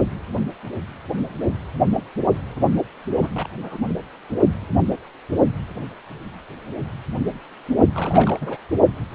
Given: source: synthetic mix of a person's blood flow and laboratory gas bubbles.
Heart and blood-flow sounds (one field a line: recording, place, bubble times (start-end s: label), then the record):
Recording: Doppler ultrasound of blood flow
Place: precordium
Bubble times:
3.22-3.29 s: bubbles
3.35-3.48 s: bubbles
3.61-3.78 s: bubbles
7.95-8.57 s: bubbles
From the record:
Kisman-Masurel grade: 221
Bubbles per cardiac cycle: several, 3 to 8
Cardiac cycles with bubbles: 10 to 50%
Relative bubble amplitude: barely perceptible (0.100 to 0.250)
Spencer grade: 2 (many but less than half of the cardiac periods contain bubble signals, singularly or in groups)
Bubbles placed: only in the low amplitude regions of the cardiac cycle